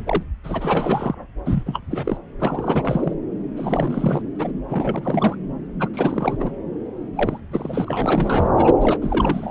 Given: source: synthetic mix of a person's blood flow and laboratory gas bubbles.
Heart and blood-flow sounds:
Doppler ultrasound of blood flow; subclavian vein
0.07-0.23 s: bubbles
0.43-1.15 s: bubbles
1.45-1.64 s: bubbles
1.66-1.80 s: bubbles
1.91-2.18 s: bubbles
2.40-3.14 s: bubbles
3.57-4.23 s: bubbles
4.38-4.53 s: bubbles
4.69-5.35 s: bubbles
5.79-5.88 s: bubbles
5.94-6.37 s: bubbles
6.40-6.51 s: bubbles
7.13-7.41 s: bubbles
7.52-8.51 s: bubbles
8.55-8.74 s: bubbles
8.80-8.98 s: bubbles
9.01-9.50 s: bubbles
From the record:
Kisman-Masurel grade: 332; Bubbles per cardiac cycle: rolling drumbeat, 9 or more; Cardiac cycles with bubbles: 50 to 99%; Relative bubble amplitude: moderate (0.250 to 0.450); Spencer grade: 3 (all of the cardiac periods contain showers or single bubble signals, but not dominating or overriding the cardiac motion signals); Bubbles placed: anywhere in the cardiac cycle

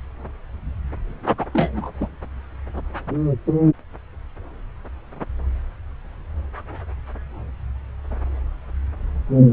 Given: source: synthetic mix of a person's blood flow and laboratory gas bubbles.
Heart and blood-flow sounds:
Doppler ultrasound of blood flow; subclavian vein
1.38-1.46 s: bubbles
1.53-1.92 s: bubbles
2.00-2.08 s: bubbles
From the record:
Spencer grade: 1 (occasional bubble signal discernible with the cardiac motion signal, with majority of cardiac periods free of bubbles); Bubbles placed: anywhere in the cardiac cycle

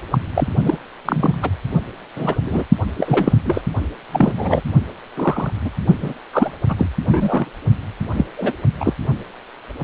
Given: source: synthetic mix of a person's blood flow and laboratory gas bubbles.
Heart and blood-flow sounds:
Doppler ultrasound of blood flow; precordium
0.00-0.02 s: bubbles
0.11-0.18 s: bubbles
0.34-0.48 s: bubbles
0.64-0.76 s: bubbles
1.05-1.49 s: bubbles
2.16-2.35 s: bubbles
2.47-2.64 s: bubbles
2.98-3.33 s: bubbles
3.45-3.62 s: bubbles
4.13-4.33 s: bubbles
4.36-4.62 s: bubbles
5.16-5.50 s: bubbles
5.64-5.71 s: bubbles
6.01-6.13 s: bubbles
6.33-6.51 s: bubbles
6.68-6.76 s: bubbles
6.79-6.86 s: bubbles
7.06-7.46 s: bubbles
8.16-8.25 s: bubbles
8.37-8.53 s: bubbles
8.79-8.94 s: bubbles
From the record:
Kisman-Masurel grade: 233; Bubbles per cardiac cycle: several, 3 to 8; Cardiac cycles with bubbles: 50 to 99%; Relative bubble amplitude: loud (0.450 to 0.775); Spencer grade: 3 (all of the cardiac periods contain showers or single bubble signals, but not dominating or overriding the cardiac motion signals); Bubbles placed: only in the low amplitude regions of the cardiac cycle

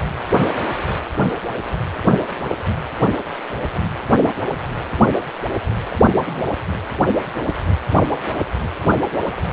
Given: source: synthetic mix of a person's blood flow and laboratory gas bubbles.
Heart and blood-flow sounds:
Doppler ultrasound of blood flow; precordium
5.89-5.96 s: bubbles
6.02-6.54 s: bubbles
From the record:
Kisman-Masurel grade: 211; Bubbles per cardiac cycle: several, 3 to 8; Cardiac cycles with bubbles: 1 to 10%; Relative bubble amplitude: barely perceptible (0.100 to 0.250); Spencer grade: 1 (occasional bubble signal discernible with the cardiac motion signal, with majority of cardiac periods free of bubbles); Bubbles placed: anywhere in the cardiac cycle

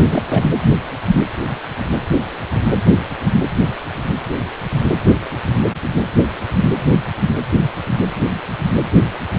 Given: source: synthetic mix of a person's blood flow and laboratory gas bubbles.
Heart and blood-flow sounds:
Doppler ultrasound of blood flow; precordium
0.01-0.23 s: bubbles
0.26-0.45 s: bubbles
From the record:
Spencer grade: 1 (occasional bubble signal discernible with the cardiac motion signal, with majority of cardiac periods free of bubbles); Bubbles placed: anywhere in the cardiac cycle

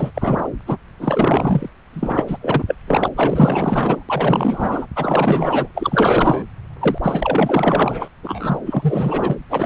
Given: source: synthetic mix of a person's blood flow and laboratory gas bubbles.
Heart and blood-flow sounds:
Doppler ultrasound of blood flow; subclavian vein
0.00-0.11 s: bubbles
0.14-0.48 s: bubbles
0.67-0.77 s: bubbles
0.99-1.70 s: bubbles
1.93-2.38 s: bubbles
2.40-2.65 s: bubbles
2.67-2.75 s: bubbles
2.87-3.08 s: bubbles
3.15-4.04 s: bubbles
4.08-4.87 s: bubbles
4.95-5.69 s: bubbles
5.74-6.44 s: bubbles
6.80-6.99 s: bubbles
7.03-8.08 s: bubbles
8.23-8.57 s: bubbles
8.65-9.37 s: bubbles
9.49-9.66 s: bubbles
From the record:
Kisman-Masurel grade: 444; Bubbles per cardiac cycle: continuous sound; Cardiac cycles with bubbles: 100%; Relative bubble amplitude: maximal (0.775 to 0.999); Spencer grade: 4 (maximum detectable bubble signal sounding continuously throughout systole and diastole of every cardiac period, and overriding the amplitude of the normal cardiac signals); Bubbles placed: anywhere in the cardiac cycle

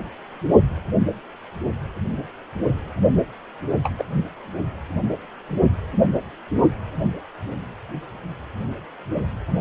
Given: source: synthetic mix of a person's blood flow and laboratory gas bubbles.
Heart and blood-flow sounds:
Doppler ultrasound of blood flow; precordium
3.83-3.91 s: bubbles
3.98-4.04 s: bubbles
From the record:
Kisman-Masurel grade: 112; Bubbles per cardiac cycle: 1 to 2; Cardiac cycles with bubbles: 1 to 10%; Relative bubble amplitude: moderate (0.250 to 0.450); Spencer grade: 1 (occasional bubble signal discernible with the cardiac motion signal, with majority of cardiac periods free of bubbles); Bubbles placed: only in the low amplitude regions of the cardiac cycle

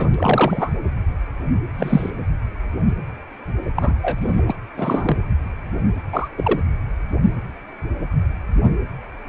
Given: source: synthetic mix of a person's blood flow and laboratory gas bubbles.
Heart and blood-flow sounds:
Doppler ultrasound of blood flow; precordium
0.00-0.70 s: bubbles
1.74-2.10 s: bubbles
3.75-3.95 s: bubbles
4.02-4.42 s: bubbles
4.46-4.56 s: bubbles
4.77-5.18 s: bubbles
6.12-6.28 s: bubbles
6.37-6.61 s: bubbles
From the record:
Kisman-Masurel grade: 223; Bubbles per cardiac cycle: several, 3 to 8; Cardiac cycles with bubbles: 10 to 50%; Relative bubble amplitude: loud (0.450 to 0.775); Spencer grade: 2 (many but less than half of the cardiac periods contain bubble signals, singularly or in groups); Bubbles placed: anywhere in the cardiac cycle

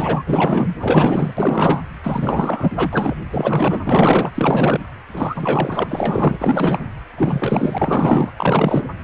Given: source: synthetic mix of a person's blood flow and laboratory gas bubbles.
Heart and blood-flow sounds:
Doppler ultrasound of blood flow; precordium
0.00-0.23 s: bubbles
0.26-0.69 s: bubbles
0.80-1.33 s: bubbles
1.37-1.80 s: bubbles
2.03-3.15 s: bubbles
3.31-3.79 s: bubbles
3.86-4.31 s: bubbles
4.35-4.80 s: bubbles
5.12-5.84 s: bubbles
5.87-6.85 s: bubbles
7.17-8.31 s: bubbles
8.37-8.88 s: bubbles
From the record:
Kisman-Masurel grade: 444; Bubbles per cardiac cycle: continuous sound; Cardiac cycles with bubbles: 100%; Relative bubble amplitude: maximal (0.775 to 0.999); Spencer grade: 4 (maximum detectable bubble signal sounding continuously throughout systole and diastole of every cardiac period, and overriding the amplitude of the normal cardiac signals); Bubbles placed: anywhere in the cardiac cycle

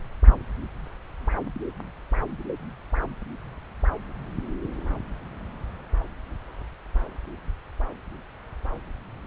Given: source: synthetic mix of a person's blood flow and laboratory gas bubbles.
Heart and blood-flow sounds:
Doppler ultrasound of blood flow; subclavian vein
0.26-0.34 s: bubbles
From the record:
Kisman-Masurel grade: 121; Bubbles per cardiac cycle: 1 to 2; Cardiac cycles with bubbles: 10 to 50%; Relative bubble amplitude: barely perceptible (0.100 to 0.250); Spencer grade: 2 (many but less than half of the cardiac periods contain bubble signals, singularly or in groups); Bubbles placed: anywhere in the cardiac cycle

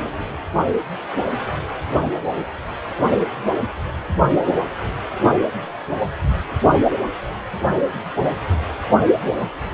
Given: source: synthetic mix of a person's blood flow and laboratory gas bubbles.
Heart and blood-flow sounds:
Doppler ultrasound of blood flow; precordium
no bubbles
From the record:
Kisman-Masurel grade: 000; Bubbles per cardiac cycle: 0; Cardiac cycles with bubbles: 0%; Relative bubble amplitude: no bubbles discernible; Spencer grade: 0 (complete lack of bubble signals)

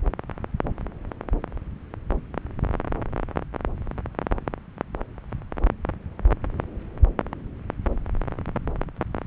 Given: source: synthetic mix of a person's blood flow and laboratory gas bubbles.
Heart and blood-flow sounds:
Doppler ultrasound of blood flow; subclavian vein
no bubbles
From the record:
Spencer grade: 0 (complete lack of bubble signals)

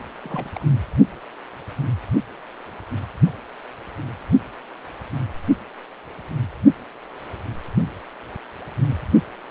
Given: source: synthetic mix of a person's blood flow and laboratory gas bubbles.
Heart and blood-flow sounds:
Doppler ultrasound of blood flow; precordium
0.22-0.50 s: bubbles
0.55-0.65 s: bubbles
From the record:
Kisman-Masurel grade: 211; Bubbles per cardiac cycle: several, 3 to 8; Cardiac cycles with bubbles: 1 to 10%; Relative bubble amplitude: barely perceptible (0.100 to 0.250); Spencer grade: 1 (occasional bubble signal discernible with the cardiac motion signal, with majority of cardiac periods free of bubbles); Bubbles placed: only in the low amplitude regions of the cardiac cycle

